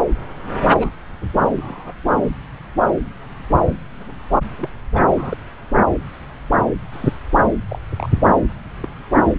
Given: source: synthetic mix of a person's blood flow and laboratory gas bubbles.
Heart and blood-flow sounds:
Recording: Doppler ultrasound of blood flow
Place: subclavian vein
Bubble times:
0.74-0.89 s: bubbles
1.57-1.94 s: bubbles
4.58-4.69 s: bubbles
4.93-5.04 s: bubbles
5.17-5.37 s: bubbles
6.92-7.19 s: bubbles
7.69-7.79 s: bubbles
7.96-8.10 s: bubbles
8.82-8.88 s: bubbles
From the record:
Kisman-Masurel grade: 121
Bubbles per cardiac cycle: 1 to 2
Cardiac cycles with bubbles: 10 to 50%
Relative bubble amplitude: barely perceptible (0.100 to 0.250)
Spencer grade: 2 (many but less than half of the cardiac periods contain bubble signals, singularly or in groups)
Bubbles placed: anywhere in the cardiac cycle

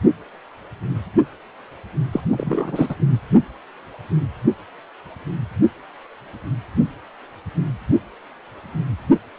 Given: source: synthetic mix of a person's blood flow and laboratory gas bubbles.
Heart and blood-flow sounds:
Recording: Doppler ultrasound of blood flow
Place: precordium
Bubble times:
2.12-2.21 s: bubbles
2.30-2.95 s: bubbles
From the record:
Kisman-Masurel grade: 212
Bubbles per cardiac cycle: several, 3 to 8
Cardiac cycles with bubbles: 1 to 10%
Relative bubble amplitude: moderate (0.250 to 0.450)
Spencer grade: 1 (occasional bubble signal discernible with the cardiac motion signal, with majority of cardiac periods free of bubbles)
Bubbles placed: only in the low amplitude regions of the cardiac cycle

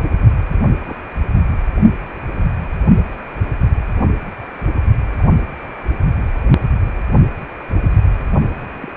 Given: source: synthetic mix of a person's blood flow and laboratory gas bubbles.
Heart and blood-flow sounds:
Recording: Doppler ultrasound of blood flow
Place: precordium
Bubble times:
0.50-0.78 s: bubbles
0.86-0.97 s: bubbles
3.97-4.01 s: bubbles
5.04-5.29 s: bubbles
8.04-8.29 s: bubbles
8.36-8.41 s: bubbles
8.71-8.91 s: bubbles
From the record:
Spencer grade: 2 (many but less than half of the cardiac periods contain bubble signals, singularly or in groups)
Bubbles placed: anywhere in the cardiac cycle

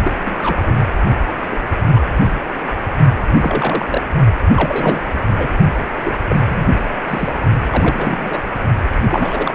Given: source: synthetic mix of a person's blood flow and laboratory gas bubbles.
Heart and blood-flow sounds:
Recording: Doppler ultrasound of blood flow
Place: precordium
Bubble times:
0.04-0.15 s: bubbles
0.25-0.57 s: bubbles
0.66-0.73 s: bubbles
1.51-1.58 s: bubbles
1.94-2.00 s: bubbles
2.17-2.30 s: bubbles
3.40-3.85 s: bubbles
3.89-4.01 s: bubbles
4.54-5.05 s: bubbles
5.38-5.48 s: bubbles
5.74-5.78 s: bubbles
6.04-6.12 s: bubbles
6.29-6.67 s: bubbles
7.08-7.33 s: bubbles
7.70-8.42 s: bubbles
9.11-9.54 s: bubbles
From the record:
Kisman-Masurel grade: 232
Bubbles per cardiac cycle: several, 3 to 8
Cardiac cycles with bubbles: 50 to 99%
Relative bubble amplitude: moderate (0.250 to 0.450)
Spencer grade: 3 (all of the cardiac periods contain showers or single bubble signals, but not dominating or overriding the cardiac motion signals)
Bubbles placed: only in the low amplitude regions of the cardiac cycle

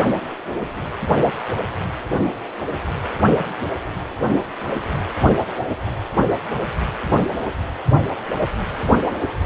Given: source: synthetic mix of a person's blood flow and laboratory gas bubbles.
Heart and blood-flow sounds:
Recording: Doppler ultrasound of blood flow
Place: precordium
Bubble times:
no bubbles
From the record:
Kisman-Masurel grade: 000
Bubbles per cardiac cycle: 0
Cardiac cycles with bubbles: 0%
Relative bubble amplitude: no bubbles discernible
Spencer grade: 0 (complete lack of bubble signals)

